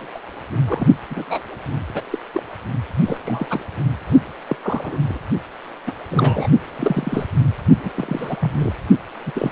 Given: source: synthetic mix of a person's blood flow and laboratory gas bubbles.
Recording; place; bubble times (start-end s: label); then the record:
Doppler ultrasound of blood flow; precordium
0.00-0.06 s: bubbles
0.14-0.20 s: bubbles
0.67-0.86 s: bubbles
1.10-1.55 s: bubbles
1.94-2.03 s: bubbles
2.11-2.20 s: bubbles
2.33-2.42 s: bubbles
3.06-3.19 s: bubbles
3.24-3.65 s: bubbles
4.47-4.56 s: bubbles
4.63-4.98 s: bubbles
5.08-5.18 s: bubbles
5.87-5.92 s: bubbles
6.09-6.48 s: bubbles
6.75-7.26 s: bubbles
7.83-7.91 s: bubbles
7.94-8.37 s: bubbles
8.40-8.74 s: bubbles
9.26-9.32 s: bubbles
9.34-9.52 s: bubbles
From the record:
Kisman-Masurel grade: 242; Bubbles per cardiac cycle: several, 3 to 8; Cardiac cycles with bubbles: 100%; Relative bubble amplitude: moderate (0.250 to 0.450); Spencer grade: 3 (all of the cardiac periods contain showers or single bubble signals, but not dominating or overriding the cardiac motion signals); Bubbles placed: only in the low amplitude regions of the cardiac cycle